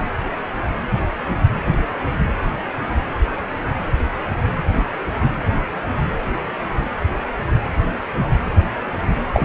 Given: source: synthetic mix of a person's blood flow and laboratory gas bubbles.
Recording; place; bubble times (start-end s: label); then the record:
Doppler ultrasound of blood flow; precordium
9.33-9.45 s: bubbles
From the record:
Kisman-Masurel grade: 213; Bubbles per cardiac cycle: several, 3 to 8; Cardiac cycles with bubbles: 1 to 10%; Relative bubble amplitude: loud (0.450 to 0.775); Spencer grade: 1 (occasional bubble signal discernible with the cardiac motion signal, with majority of cardiac periods free of bubbles); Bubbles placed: anywhere in the cardiac cycle